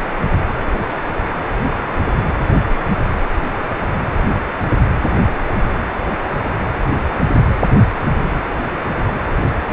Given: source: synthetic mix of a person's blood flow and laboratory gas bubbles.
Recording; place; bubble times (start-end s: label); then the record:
Doppler ultrasound of blood flow; precordium
no bubbles
From the record:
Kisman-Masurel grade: 000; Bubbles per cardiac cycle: 0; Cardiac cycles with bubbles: 0%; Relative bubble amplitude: no bubbles discernible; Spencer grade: 0 (complete lack of bubble signals)